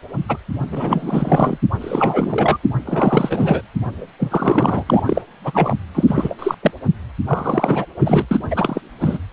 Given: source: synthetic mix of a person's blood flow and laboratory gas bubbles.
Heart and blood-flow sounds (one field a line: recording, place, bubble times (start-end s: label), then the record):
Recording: Doppler ultrasound of blood flow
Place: precordium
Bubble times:
0.28-0.37 s: bubbles
0.72-1.58 s: bubbles
1.81-2.58 s: bubbles
2.85-3.61 s: bubbles
4.19-4.83 s: bubbles
4.86-5.21 s: bubbles
5.43-5.76 s: bubbles
5.95-6.04 s: bubbles
6.07-6.34 s: bubbles
6.38-6.54 s: bubbles
6.62-6.71 s: bubbles
7.27-7.85 s: bubbles
7.99-8.25 s: bubbles
8.31-8.38 s: bubbles
8.50-8.81 s: bubbles
9.00-9.18 s: bubbles
From the record:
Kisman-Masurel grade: 343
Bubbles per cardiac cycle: rolling drumbeat, 9 or more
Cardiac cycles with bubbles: 100%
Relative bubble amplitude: loud (0.450 to 0.775)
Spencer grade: 3 (all of the cardiac periods contain showers or single bubble signals, but not dominating or overriding the cardiac motion signals)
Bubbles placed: anywhere in the cardiac cycle